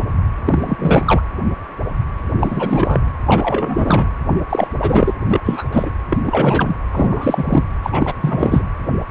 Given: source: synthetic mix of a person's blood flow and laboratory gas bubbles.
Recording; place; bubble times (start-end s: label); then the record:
Doppler ultrasound of blood flow; precordium
0.46-1.03 s: bubbles
1.06-1.21 s: bubbles
2.40-3.05 s: bubbles
3.27-4.10 s: bubbles
4.49-4.68 s: bubbles
4.80-5.13 s: bubbles
5.27-5.40 s: bubbles
5.44-5.64 s: bubbles
5.71-5.90 s: bubbles
6.10-6.17 s: bubbles
6.23-6.76 s: bubbles
6.92-7.64 s: bubbles
7.83-7.90 s: bubbles
7.92-8.12 s: bubbles
8.21-8.62 s: bubbles
From the record:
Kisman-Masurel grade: 332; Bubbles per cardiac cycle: rolling drumbeat, 9 or more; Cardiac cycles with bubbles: 50 to 99%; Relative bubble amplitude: moderate (0.250 to 0.450); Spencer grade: 3 (all of the cardiac periods contain showers or single bubble signals, but not dominating or overriding the cardiac motion signals); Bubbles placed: anywhere in the cardiac cycle